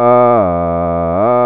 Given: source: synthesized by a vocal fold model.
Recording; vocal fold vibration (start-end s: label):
sustained vowel that changes in the middle
0.00-0.31 s: 121.7 Hz, open quotient 0.28
0.51-1.11 s: 85.2 Hz, open quotient 0.34
1.31-1.46 s: 121.7 Hz, open quotient 0.28